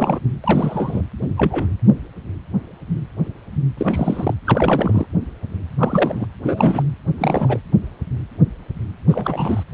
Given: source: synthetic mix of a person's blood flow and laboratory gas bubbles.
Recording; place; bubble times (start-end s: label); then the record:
Doppler ultrasound of blood flow; precordium
0.00-0.19 s: bubbles
0.44-1.02 s: bubbles
1.37-1.67 s: bubbles
3.77-4.34 s: bubbles
4.45-5.07 s: bubbles
5.78-6.26 s: bubbles
6.43-6.83 s: bubbles
7.18-7.59 s: bubbles
9.08-9.63 s: bubbles
9.72-9.74 s: bubbles
From the record:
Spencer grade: 3 (all of the cardiac periods contain showers or single bubble signals, but not dominating or overriding the cardiac motion signals); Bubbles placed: anywhere in the cardiac cycle